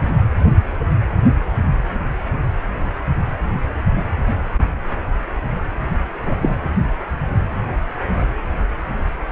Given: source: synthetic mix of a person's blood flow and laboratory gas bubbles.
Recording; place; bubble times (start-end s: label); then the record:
Doppler ultrasound of blood flow; precordium
6.25-6.35 s: bubbles
6.42-6.58 s: bubbles
From the record:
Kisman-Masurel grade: 112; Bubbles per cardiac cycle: 1 to 2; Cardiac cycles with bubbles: 1 to 10%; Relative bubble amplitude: moderate (0.250 to 0.450); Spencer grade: 1 (occasional bubble signal discernible with the cardiac motion signal, with majority of cardiac periods free of bubbles); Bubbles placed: only in the low amplitude regions of the cardiac cycle